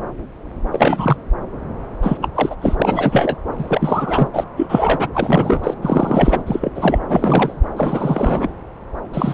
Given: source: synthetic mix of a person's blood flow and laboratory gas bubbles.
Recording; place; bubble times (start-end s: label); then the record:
Doppler ultrasound of blood flow; subclavian vein
0.72-1.17 s: bubbles
2.02-2.17 s: bubbles
2.21-2.28 s: bubbles
2.35-2.55 s: bubbles
2.62-2.77 s: bubbles
2.80-3.37 s: bubbles
3.58-4.28 s: bubbles
4.33-4.44 s: bubbles
4.57-5.07 s: bubbles
5.14-5.74 s: bubbles
5.82-6.43 s: bubbles
6.46-6.71 s: bubbles
6.75-7.00 s: bubbles
7.08-7.62 s: bubbles
7.76-8.48 s: bubbles
9.13-9.34 s: bubbles
From the record:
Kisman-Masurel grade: 333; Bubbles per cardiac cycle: rolling drumbeat, 9 or more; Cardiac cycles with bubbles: 50 to 99%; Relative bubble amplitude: loud (0.450 to 0.775); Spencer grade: 3 (all of the cardiac periods contain showers or single bubble signals, but not dominating or overriding the cardiac motion signals); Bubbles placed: anywhere in the cardiac cycle